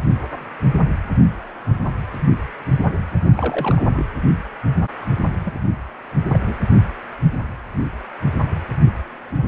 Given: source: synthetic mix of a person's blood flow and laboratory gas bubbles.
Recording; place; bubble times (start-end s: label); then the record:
Doppler ultrasound of blood flow; precordium
3.37-3.82 s: bubbles
3.94-4.06 s: bubbles
5.45-5.54 s: bubbles
6.26-6.58 s: bubbles
From the record:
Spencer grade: 2 (many but less than half of the cardiac periods contain bubble signals, singularly or in groups); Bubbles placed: anywhere in the cardiac cycle